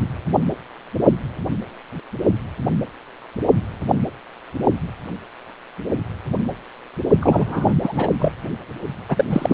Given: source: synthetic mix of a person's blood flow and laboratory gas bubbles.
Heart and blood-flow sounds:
Doppler ultrasound of blood flow; precordium
7.20-7.75 s: bubbles
7.82-8.08 s: bubbles
8.18-8.32 s: bubbles
9.08-9.24 s: bubbles
9.29-9.54 s: bubbles
From the record:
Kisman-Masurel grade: 223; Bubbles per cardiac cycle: several, 3 to 8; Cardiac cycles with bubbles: 10 to 50%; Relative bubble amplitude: loud (0.450 to 0.775); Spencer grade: 2 (many but less than half of the cardiac periods contain bubble signals, singularly or in groups); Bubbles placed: only in the low amplitude regions of the cardiac cycle

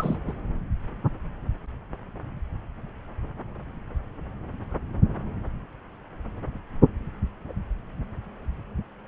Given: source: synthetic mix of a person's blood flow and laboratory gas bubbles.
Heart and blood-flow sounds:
Doppler ultrasound of blood flow; subclavian vein
0.00-0.18 s: bubbles
0.27-0.33 s: bubbles
From the record:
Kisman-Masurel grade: 211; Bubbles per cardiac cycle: several, 3 to 8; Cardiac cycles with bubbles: 1 to 10%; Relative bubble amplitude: barely perceptible (0.100 to 0.250); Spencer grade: 1 (occasional bubble signal discernible with the cardiac motion signal, with majority of cardiac periods free of bubbles); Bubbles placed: anywhere in the cardiac cycle

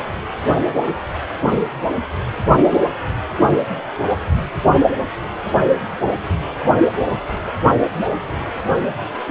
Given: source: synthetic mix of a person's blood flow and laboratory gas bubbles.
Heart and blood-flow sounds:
Doppler ultrasound of blood flow; precordium
no bubbles
From the record:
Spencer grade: 0 (complete lack of bubble signals)

